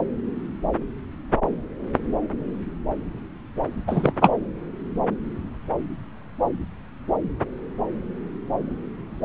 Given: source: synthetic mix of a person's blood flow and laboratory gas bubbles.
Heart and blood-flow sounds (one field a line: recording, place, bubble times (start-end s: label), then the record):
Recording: Doppler ultrasound of blood flow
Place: subclavian vein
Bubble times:
3.87-4.12 s: bubbles
4.20-4.29 s: bubbles
From the record:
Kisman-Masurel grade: 213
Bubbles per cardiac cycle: several, 3 to 8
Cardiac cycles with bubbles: 1 to 10%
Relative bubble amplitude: loud (0.450 to 0.775)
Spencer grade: 1 (occasional bubble signal discernible with the cardiac motion signal, with majority of cardiac periods free of bubbles)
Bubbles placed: anywhere in the cardiac cycle